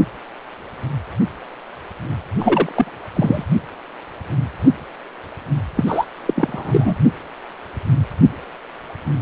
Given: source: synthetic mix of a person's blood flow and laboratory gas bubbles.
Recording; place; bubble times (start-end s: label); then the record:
Doppler ultrasound of blood flow; precordium
2.39-2.93 s: bubbles
3.16-3.44 s: bubbles
5.75-6.05 s: bubbles
6.25-6.95 s: bubbles
From the record:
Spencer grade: 2 (many but less than half of the cardiac periods contain bubble signals, singularly or in groups); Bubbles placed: anywhere in the cardiac cycle